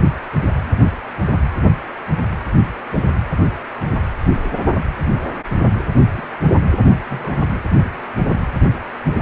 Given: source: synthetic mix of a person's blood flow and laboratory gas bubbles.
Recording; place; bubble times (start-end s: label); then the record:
Doppler ultrasound of blood flow; precordium
0.83-0.92 s: bubbles
2.91-3.04 s: bubbles
4.33-4.57 s: bubbles
6.08-6.27 s: bubbles
7.09-7.40 s: bubbles
From the record:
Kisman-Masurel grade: 121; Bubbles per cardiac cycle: 1 to 2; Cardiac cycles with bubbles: 10 to 50%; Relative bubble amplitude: barely perceptible (0.100 to 0.250); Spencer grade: 2 (many but less than half of the cardiac periods contain bubble signals, singularly or in groups); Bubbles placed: anywhere in the cardiac cycle